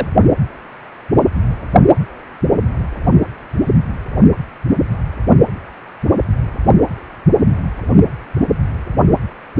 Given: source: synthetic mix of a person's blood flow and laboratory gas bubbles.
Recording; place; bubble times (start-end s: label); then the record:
Doppler ultrasound of blood flow; precordium
0.00-0.06 s: bubbles
From the record:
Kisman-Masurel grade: 222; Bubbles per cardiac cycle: several, 3 to 8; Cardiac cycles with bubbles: 10 to 50%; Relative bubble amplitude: moderate (0.250 to 0.450); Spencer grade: 2 (many but less than half of the cardiac periods contain bubble signals, singularly or in groups); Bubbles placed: only in the low amplitude regions of the cardiac cycle